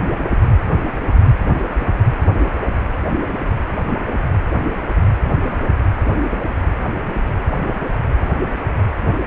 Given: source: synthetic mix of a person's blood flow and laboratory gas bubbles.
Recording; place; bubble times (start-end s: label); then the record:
Doppler ultrasound of blood flow; precordium
no bubbles
From the record:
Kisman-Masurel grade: 000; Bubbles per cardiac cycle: 0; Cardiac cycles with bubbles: 0%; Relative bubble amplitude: no bubbles discernible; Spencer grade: 0 (complete lack of bubble signals)